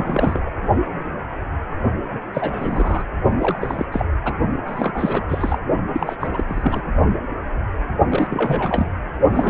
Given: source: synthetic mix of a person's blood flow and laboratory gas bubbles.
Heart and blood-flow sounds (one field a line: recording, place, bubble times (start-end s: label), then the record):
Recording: Doppler ultrasound of blood flow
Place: precordium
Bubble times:
0.00-0.39 s: bubbles
0.46-0.50 s: bubbles
2.11-2.19 s: bubbles
2.34-3.04 s: bubbles
3.40-3.85 s: bubbles
3.92-4.05 s: bubbles
4.25-4.34 s: bubbles
4.66-5.25 s: bubbles
5.29-5.58 s: bubbles
5.93-6.16 s: bubbles
6.20-6.28 s: bubbles
6.33-6.44 s: bubbles
6.47-6.81 s: bubbles
8.10-8.87 s: bubbles
9.33-9.50 s: bubbles
From the record:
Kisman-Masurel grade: 332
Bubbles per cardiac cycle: rolling drumbeat, 9 or more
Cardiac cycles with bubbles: 50 to 99%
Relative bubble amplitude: moderate (0.250 to 0.450)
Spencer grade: 3 (all of the cardiac periods contain showers or single bubble signals, but not dominating or overriding the cardiac motion signals)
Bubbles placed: only in the low amplitude regions of the cardiac cycle